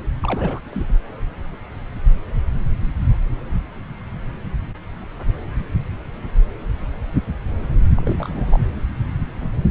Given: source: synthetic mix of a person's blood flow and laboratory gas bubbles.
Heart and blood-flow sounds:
Doppler ultrasound of blood flow; subclavian vein
0.22-0.60 s: bubbles
0.71-0.86 s: bubbles
7.96-8.60 s: bubbles
From the record:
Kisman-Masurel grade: 221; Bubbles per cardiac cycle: several, 3 to 8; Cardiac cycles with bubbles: 10 to 50%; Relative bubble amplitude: barely perceptible (0.100 to 0.250); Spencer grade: 2 (many but less than half of the cardiac periods contain bubble signals, singularly or in groups); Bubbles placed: anywhere in the cardiac cycle

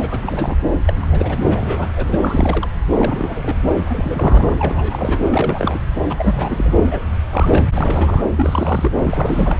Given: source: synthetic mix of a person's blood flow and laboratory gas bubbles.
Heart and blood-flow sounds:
Doppler ultrasound of blood flow; subclavian vein
0.00-0.56 s: bubbles
0.85-0.93 s: bubbles
1.02-1.06 s: bubbles
1.11-1.89 s: bubbles
1.95-2.69 s: bubbles
2.90-3.56 s: bubbles
3.84-4.55 s: bubbles
4.58-5.26 s: bubbles
5.31-5.79 s: bubbles
6.09-6.14 s: bubbles
6.18-6.84 s: bubbles
6.91-7.03 s: bubbles
7.29-7.65 s: bubbles
7.74-8.21 s: bubbles
8.36-8.92 s: bubbles
9.02-9.58 s: bubbles
From the record:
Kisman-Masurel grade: 332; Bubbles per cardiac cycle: rolling drumbeat, 9 or more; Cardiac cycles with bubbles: 50 to 99%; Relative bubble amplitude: moderate (0.250 to 0.450); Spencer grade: 3 (all of the cardiac periods contain showers or single bubble signals, but not dominating or overriding the cardiac motion signals); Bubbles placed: anywhere in the cardiac cycle

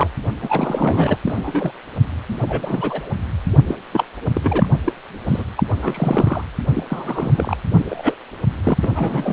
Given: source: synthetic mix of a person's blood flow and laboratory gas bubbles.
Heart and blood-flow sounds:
Doppler ultrasound of blood flow; precordium
0.00-0.08 s: bubbles
0.41-1.17 s: bubbles
1.25-1.72 s: bubbles
2.28-2.36 s: bubbles
2.42-3.10 s: bubbles
3.67-3.76 s: bubbles
3.92-4.04 s: bubbles
4.34-4.68 s: bubbles
4.85-4.92 s: bubbles
5.27-5.43 s: bubbles
5.57-5.63 s: bubbles
5.82-6.43 s: bubbles
6.74-6.85 s: bubbles
6.88-7.57 s: bubbles
7.71-7.86 s: bubbles
7.89-8.14 s: bubbles
8.63-8.78 s: bubbles
8.83-9.33 s: bubbles
From the record:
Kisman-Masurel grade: 242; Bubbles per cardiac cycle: several, 3 to 8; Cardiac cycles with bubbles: 100%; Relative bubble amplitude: moderate (0.250 to 0.450); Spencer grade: 3 (all of the cardiac periods contain showers or single bubble signals, but not dominating or overriding the cardiac motion signals); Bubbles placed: anywhere in the cardiac cycle

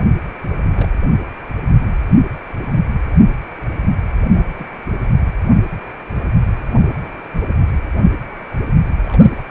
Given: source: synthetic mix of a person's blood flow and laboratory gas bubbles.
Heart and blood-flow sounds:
Doppler ultrasound of blood flow; precordium
0.00-0.10 s: bubbles
0.64-0.70 s: bubbles
0.76-0.89 s: bubbles
4.33-4.66 s: bubbles
6.75-7.10 s: bubbles
7.35-7.54 s: bubbles
9.05-9.42 s: bubbles
From the record:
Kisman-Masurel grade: 221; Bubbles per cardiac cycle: several, 3 to 8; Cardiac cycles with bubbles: 10 to 50%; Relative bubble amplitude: barely perceptible (0.100 to 0.250); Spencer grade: 2 (many but less than half of the cardiac periods contain bubble signals, singularly or in groups); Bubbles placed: anywhere in the cardiac cycle

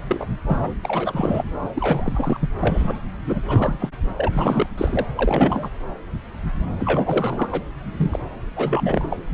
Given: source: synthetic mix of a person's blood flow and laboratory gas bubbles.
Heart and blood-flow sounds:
Doppler ultrasound of blood flow; subclavian vein
0.09-0.27 s: bubbles
0.47-0.71 s: bubbles
0.84-1.44 s: bubbles
1.75-2.49 s: bubbles
2.61-3.00 s: bubbles
3.27-3.40 s: bubbles
3.45-3.89 s: bubbles
4.17-4.29 s: bubbles
4.33-4.66 s: bubbles
4.77-5.06 s: bubbles
5.15-5.70 s: bubbles
6.79-7.49 s: bubbles
7.51-7.62 s: bubbles
7.97-8.19 s: bubbles
8.56-9.17 s: bubbles
From the record:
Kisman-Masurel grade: 332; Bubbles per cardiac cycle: rolling drumbeat, 9 or more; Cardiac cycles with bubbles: 50 to 99%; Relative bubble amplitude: moderate (0.250 to 0.450); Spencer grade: 3 (all of the cardiac periods contain showers or single bubble signals, but not dominating or overriding the cardiac motion signals); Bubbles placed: anywhere in the cardiac cycle

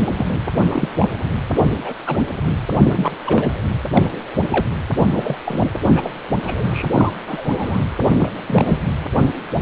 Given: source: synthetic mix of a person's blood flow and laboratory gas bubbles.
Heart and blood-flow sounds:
Doppler ultrasound of blood flow; precordium
0.10-0.26 s: bubbles
0.67-0.89 s: bubbles
0.99-1.07 s: bubbles
1.84-1.95 s: bubbles
2.06-2.18 s: bubbles
2.46-2.52 s: bubbles
2.72-3.12 s: bubbles
3.24-3.60 s: bubbles
3.92-4.04 s: bubbles
4.51-4.66 s: bubbles
5.10-5.37 s: bubbles
5.46-5.67 s: bubbles
5.95-6.14 s: bubbles
6.42-6.87 s: bubbles
6.93-7.12 s: bubbles
7.26-7.83 s: bubbles
8.15-8.31 s: bubbles
8.47-8.79 s: bubbles
From the record:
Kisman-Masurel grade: 242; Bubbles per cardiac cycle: several, 3 to 8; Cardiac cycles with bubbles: 100%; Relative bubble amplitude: moderate (0.250 to 0.450); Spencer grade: 3 (all of the cardiac periods contain showers or single bubble signals, but not dominating or overriding the cardiac motion signals); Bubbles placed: anywhere in the cardiac cycle

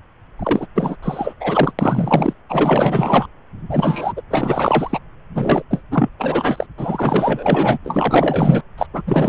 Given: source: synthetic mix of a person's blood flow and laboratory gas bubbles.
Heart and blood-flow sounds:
Doppler ultrasound of blood flow; subclavian vein
0.39-0.67 s: bubbles
0.74-0.96 s: bubbles
1.02-1.33 s: bubbles
1.40-1.73 s: bubbles
1.79-2.33 s: bubbles
2.49-3.27 s: bubbles
3.70-4.12 s: bubbles
4.17-4.21 s: bubbles
4.30-5.00 s: bubbles
5.34-5.62 s: bubbles
5.70-5.82 s: bubbles
5.91-6.09 s: bubbles
6.18-6.67 s: bubbles
6.78-7.79 s: bubbles
7.85-8.62 s: bubbles
8.78-8.87 s: bubbles
8.94-9.02 s: bubbles
9.06-9.29 s: bubbles
From the record:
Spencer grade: 4 (maximum detectable bubble signal sounding continuously throughout systole and diastole of every cardiac period, and overriding the amplitude of the normal cardiac signals); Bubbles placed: anywhere in the cardiac cycle

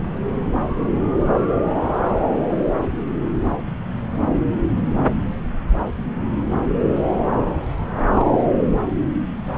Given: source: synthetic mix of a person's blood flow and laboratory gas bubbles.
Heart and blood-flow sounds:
Doppler ultrasound of blood flow; subclavian vein
8.13-8.32 s: bubbles
From the record:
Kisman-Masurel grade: 112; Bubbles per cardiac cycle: 1 to 2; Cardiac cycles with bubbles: 1 to 10%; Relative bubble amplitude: moderate (0.250 to 0.450); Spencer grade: 1 (occasional bubble signal discernible with the cardiac motion signal, with majority of cardiac periods free of bubbles); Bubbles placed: anywhere in the cardiac cycle

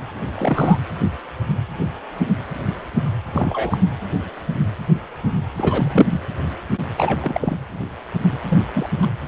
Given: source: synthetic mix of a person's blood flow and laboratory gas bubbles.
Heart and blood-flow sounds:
Doppler ultrasound of blood flow; precordium
0.35-0.78 s: bubbles
3.26-3.77 s: bubbles
5.56-6.21 s: bubbles
6.97-7.57 s: bubbles
8.48-8.58 s: bubbles
8.73-8.89 s: bubbles
9.02-9.06 s: bubbles
From the record:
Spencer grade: 2 (many but less than half of the cardiac periods contain bubble signals, singularly or in groups); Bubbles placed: anywhere in the cardiac cycle

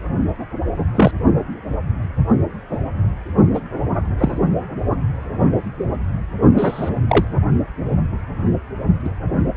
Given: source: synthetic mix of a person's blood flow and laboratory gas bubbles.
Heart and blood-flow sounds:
Doppler ultrasound of blood flow; precordium
0.94-1.11 s: bubbles
3.54-3.60 s: bubbles
4.18-4.38 s: bubbles
6.57-6.91 s: bubbles
7.08-7.25 s: bubbles
9.04-9.09 s: bubbles
From the record:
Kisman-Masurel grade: 123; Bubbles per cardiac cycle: 1 to 2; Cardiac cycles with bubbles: 10 to 50%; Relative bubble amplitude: loud (0.450 to 0.775); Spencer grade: 2 (many but less than half of the cardiac periods contain bubble signals, singularly or in groups); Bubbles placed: only in the low amplitude regions of the cardiac cycle

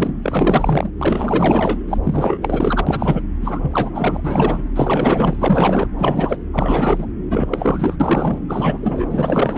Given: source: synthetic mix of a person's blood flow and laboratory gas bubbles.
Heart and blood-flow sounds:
Doppler ultrasound of blood flow; subclavian vein
0.00-0.12 s: bubbles
0.23-0.90 s: bubbles
0.98-1.79 s: bubbles
1.88-1.98 s: bubbles
2.03-3.23 s: bubbles
3.42-4.21 s: bubbles
4.24-4.62 s: bubbles
4.75-5.88 s: bubbles
5.98-6.37 s: bubbles
6.53-7.07 s: bubbles
7.30-7.96 s: bubbles
7.99-8.38 s: bubbles
8.47-9.06 s: bubbles
9.10-9.58 s: bubbles
From the record:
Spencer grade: 4 (maximum detectable bubble signal sounding continuously throughout systole and diastole of every cardiac period, and overriding the amplitude of the normal cardiac signals); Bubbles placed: anywhere in the cardiac cycle

